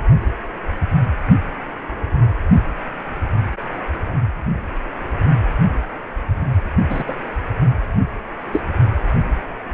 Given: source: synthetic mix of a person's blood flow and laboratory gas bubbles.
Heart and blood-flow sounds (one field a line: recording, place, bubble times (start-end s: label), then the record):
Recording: Doppler ultrasound of blood flow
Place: precordium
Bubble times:
6.90-7.03 s: bubbles
7.08-7.14 s: bubbles
8.52-8.61 s: bubbles
From the record:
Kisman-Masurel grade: 223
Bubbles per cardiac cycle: several, 3 to 8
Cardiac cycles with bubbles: 10 to 50%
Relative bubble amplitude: loud (0.450 to 0.775)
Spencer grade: 2 (many but less than half of the cardiac periods contain bubble signals, singularly or in groups)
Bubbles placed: only in the low amplitude regions of the cardiac cycle